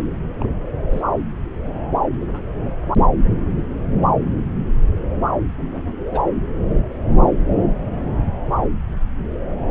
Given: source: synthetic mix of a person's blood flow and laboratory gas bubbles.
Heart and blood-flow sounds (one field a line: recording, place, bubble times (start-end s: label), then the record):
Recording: Doppler ultrasound of blood flow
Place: subclavian vein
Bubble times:
0.40-0.47 s: bubbles
0.90-1.02 s: bubbles
2.15-2.50 s: bubbles
2.65-2.72 s: bubbles
5.71-6.05 s: bubbles
6.10-6.21 s: bubbles
From the record:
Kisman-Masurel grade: 121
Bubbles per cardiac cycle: 1 to 2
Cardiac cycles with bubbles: 10 to 50%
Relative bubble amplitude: barely perceptible (0.100 to 0.250)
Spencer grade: 2 (many but less than half of the cardiac periods contain bubble signals, singularly or in groups)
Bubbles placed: anywhere in the cardiac cycle